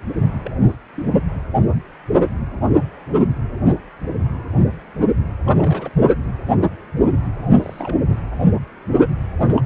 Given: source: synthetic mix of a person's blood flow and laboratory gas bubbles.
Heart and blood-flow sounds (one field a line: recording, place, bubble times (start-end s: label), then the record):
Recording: Doppler ultrasound of blood flow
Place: precordium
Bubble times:
0.44-0.51 s: bubbles
0.67-0.77 s: bubbles
0.96-1.06 s: bubbles
5.47-5.90 s: bubbles
7.43-7.52 s: bubbles
7.57-8.01 s: bubbles
8.09-8.19 s: bubbles
9.44-9.62 s: bubbles
From the record:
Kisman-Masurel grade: 221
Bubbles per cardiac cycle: several, 3 to 8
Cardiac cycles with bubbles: 10 to 50%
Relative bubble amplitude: barely perceptible (0.100 to 0.250)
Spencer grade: 2 (many but less than half of the cardiac periods contain bubble signals, singularly or in groups)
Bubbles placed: anywhere in the cardiac cycle